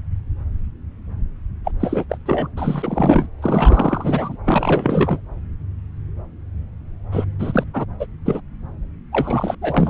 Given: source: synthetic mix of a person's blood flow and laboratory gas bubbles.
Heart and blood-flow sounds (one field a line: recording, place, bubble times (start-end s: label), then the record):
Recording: Doppler ultrasound of blood flow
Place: subclavian vein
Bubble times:
1.65-1.71 s: bubbles
1.79-2.04 s: bubbles
2.10-2.18 s: bubbles
2.26-2.48 s: bubbles
2.56-3.26 s: bubbles
3.42-4.37 s: bubbles
4.45-5.21 s: bubbles
7.12-7.25 s: bubbles
7.39-7.63 s: bubbles
7.74-7.85 s: bubbles
8.00-8.06 s: bubbles
8.25-8.40 s: bubbles
9.12-9.55 s: bubbles
9.61-9.90 s: bubbles
From the record:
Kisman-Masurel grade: 332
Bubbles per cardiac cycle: rolling drumbeat, 9 or more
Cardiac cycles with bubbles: 50 to 99%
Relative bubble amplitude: moderate (0.250 to 0.450)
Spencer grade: 3 (all of the cardiac periods contain showers or single bubble signals, but not dominating or overriding the cardiac motion signals)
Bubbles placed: anywhere in the cardiac cycle